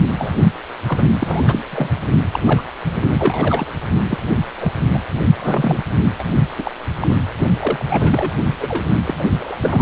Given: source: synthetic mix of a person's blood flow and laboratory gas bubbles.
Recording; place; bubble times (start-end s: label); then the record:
Doppler ultrasound of blood flow; precordium
0.18-0.35 s: bubbles
0.87-1.03 s: bubbles
1.19-1.43 s: bubbles
1.46-1.65 s: bubbles
1.71-1.89 s: bubbles
2.31-2.40 s: bubbles
2.46-2.62 s: bubbles
3.02-3.67 s: bubbles
4.09-4.19 s: bubbles
4.60-4.72 s: bubbles
4.94-5.02 s: bubbles
5.38-5.82 s: bubbles
6.19-6.23 s: bubbles
6.58-6.71 s: bubbles
7.01-7.18 s: bubbles
7.59-7.85 s: bubbles
7.89-8.38 s: bubbles
8.59-8.84 s: bubbles
9.04-9.15 s: bubbles
9.20-9.27 s: bubbles
9.39-9.55 s: bubbles
9.57-9.82 s: bubbles
From the record:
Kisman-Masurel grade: 242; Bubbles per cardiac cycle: several, 3 to 8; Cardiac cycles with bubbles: 100%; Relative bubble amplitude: moderate (0.250 to 0.450); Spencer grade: 3 (all of the cardiac periods contain showers or single bubble signals, but not dominating or overriding the cardiac motion signals); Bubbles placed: only in the low amplitude regions of the cardiac cycle